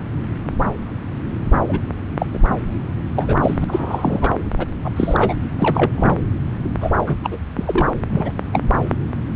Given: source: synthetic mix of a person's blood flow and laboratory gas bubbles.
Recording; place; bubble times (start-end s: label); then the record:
Doppler ultrasound of blood flow; subclavian vein
1.68-1.80 s: bubbles
2.19-2.26 s: bubbles
2.33-2.39 s: bubbles
3.15-3.36 s: bubbles
3.42-3.65 s: bubbles
3.68-4.32 s: bubbles
4.58-4.67 s: bubbles
4.84-4.91 s: bubbles
4.96-5.34 s: bubbles
5.58-5.92 s: bubbles
5.96-6.17 s: bubbles
6.80-6.91 s: bubbles
7.06-7.15 s: bubbles
7.23-7.39 s: bubbles
7.55-7.90 s: bubbles
8.12-8.32 s: bubbles
8.53-8.61 s: bubbles
From the record:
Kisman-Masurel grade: 232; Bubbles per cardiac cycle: several, 3 to 8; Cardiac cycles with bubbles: 50 to 99%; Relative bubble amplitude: moderate (0.250 to 0.450); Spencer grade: 3 (all of the cardiac periods contain showers or single bubble signals, but not dominating or overriding the cardiac motion signals); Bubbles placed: anywhere in the cardiac cycle